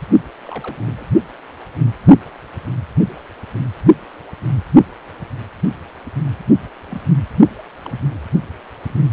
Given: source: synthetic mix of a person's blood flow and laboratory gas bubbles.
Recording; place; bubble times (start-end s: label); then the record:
Doppler ultrasound of blood flow; precordium
0.47-0.83 s: bubbles
0.86-1.05 s: bubbles
6.90-7.01 s: bubbles
7.84-8.00 s: bubbles
From the record:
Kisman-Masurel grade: 121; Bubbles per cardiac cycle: 1 to 2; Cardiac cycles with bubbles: 10 to 50%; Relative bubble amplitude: barely perceptible (0.100 to 0.250); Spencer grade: 2 (many but less than half of the cardiac periods contain bubble signals, singularly or in groups); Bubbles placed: only in the low amplitude regions of the cardiac cycle